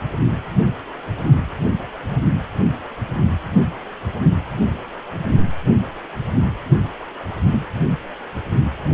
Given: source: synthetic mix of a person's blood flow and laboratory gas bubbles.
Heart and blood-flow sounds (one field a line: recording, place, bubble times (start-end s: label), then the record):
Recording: Doppler ultrasound of blood flow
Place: precordium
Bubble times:
no bubbles
From the record:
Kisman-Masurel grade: 000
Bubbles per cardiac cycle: 0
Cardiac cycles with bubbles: 0%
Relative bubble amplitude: no bubbles discernible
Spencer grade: 0 (complete lack of bubble signals)